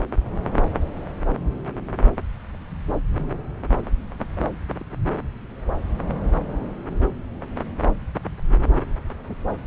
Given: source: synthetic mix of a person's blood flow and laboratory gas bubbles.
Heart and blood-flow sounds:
Doppler ultrasound of blood flow; subclavian vein
4.16-4.27 s: bubbles
4.35-4.46 s: bubbles
4.79-4.84 s: bubbles
From the record:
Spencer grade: 1 (occasional bubble signal discernible with the cardiac motion signal, with majority of cardiac periods free of bubbles); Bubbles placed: anywhere in the cardiac cycle

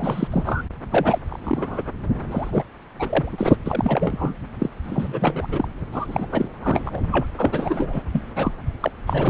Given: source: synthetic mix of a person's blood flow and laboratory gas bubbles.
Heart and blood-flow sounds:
Doppler ultrasound of blood flow; subclavian vein
0.00-0.28 s: bubbles
0.32-0.62 s: bubbles
0.90-1.19 s: bubbles
1.27-1.83 s: bubbles
2.31-2.64 s: bubbles
3.00-3.56 s: bubbles
3.65-4.34 s: bubbles
4.59-4.69 s: bubbles
4.84-5.47 s: bubbles
5.51-5.68 s: bubbles
5.92-6.26 s: bubbles
6.31-6.48 s: bubbles
6.62-7.03 s: bubbles
7.11-7.30 s: bubbles
7.38-8.04 s: bubbles
8.12-8.21 s: bubbles
8.36-8.52 s: bubbles
8.80-8.91 s: bubbles
9.07-9.30 s: bubbles
From the record:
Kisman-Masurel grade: 342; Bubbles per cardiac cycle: rolling drumbeat, 9 or more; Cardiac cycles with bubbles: 100%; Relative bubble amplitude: moderate (0.250 to 0.450); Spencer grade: 3 (all of the cardiac periods contain showers or single bubble signals, but not dominating or overriding the cardiac motion signals); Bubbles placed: anywhere in the cardiac cycle

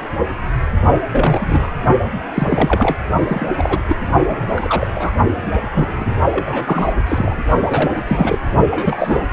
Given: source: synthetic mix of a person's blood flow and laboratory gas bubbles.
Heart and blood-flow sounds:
Doppler ultrasound of blood flow; precordium
1.12-1.69 s: bubbles
2.34-2.96 s: bubbles
3.28-3.55 s: bubbles
3.57-3.83 s: bubbles
3.88-3.96 s: bubbles
4.26-4.92 s: bubbles
4.95-5.12 s: bubbles
5.62-6.14 s: bubbles
6.31-6.93 s: bubbles
7.06-7.35 s: bubbles
7.69-7.92 s: bubbles
7.95-8.02 s: bubbles
8.07-8.39 s: bubbles
8.71-9.26 s: bubbles
From the record:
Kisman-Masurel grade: 232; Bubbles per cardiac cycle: several, 3 to 8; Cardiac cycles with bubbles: 50 to 99%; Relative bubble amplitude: moderate (0.250 to 0.450); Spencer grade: 3 (all of the cardiac periods contain showers or single bubble signals, but not dominating or overriding the cardiac motion signals); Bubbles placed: only in the low amplitude regions of the cardiac cycle

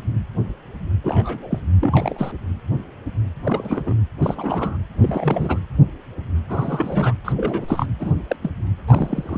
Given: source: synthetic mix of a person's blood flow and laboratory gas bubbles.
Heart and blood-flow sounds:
Doppler ultrasound of blood flow; precordium
1.04-1.61 s: bubbles
1.80-2.31 s: bubbles
3.44-3.94 s: bubbles
4.20-4.77 s: bubbles
5.00-5.59 s: bubbles
6.49-7.13 s: bubbles
7.25-7.33 s: bubbles
7.36-7.85 s: bubbles
7.99-8.14 s: bubbles
8.27-8.36 s: bubbles
8.42-8.50 s: bubbles
8.87-9.38 s: bubbles
From the record:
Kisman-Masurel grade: 232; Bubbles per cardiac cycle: several, 3 to 8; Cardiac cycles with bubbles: 50 to 99%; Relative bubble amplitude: moderate (0.250 to 0.450); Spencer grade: 3 (all of the cardiac periods contain showers or single bubble signals, but not dominating or overriding the cardiac motion signals); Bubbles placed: anywhere in the cardiac cycle

